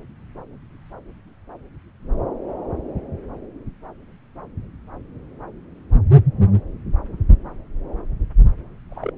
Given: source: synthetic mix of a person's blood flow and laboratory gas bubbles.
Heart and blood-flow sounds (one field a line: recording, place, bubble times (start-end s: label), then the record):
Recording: Doppler ultrasound of blood flow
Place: subclavian vein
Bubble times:
8.90-9.11 s: bubbles
From the record:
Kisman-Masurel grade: 111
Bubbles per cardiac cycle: 1 to 2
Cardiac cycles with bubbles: 1 to 10%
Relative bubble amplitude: barely perceptible (0.100 to 0.250)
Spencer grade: 1 (occasional bubble signal discernible with the cardiac motion signal, with majority of cardiac periods free of bubbles)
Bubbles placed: anywhere in the cardiac cycle